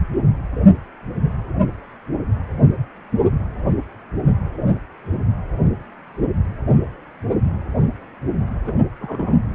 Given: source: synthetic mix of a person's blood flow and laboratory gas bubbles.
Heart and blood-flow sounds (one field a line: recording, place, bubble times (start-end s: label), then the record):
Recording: Doppler ultrasound of blood flow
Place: precordium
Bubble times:
8.65-8.78 s: bubbles
9.01-9.34 s: bubbles
From the record:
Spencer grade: 2 (many but less than half of the cardiac periods contain bubble signals, singularly or in groups)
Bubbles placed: anywhere in the cardiac cycle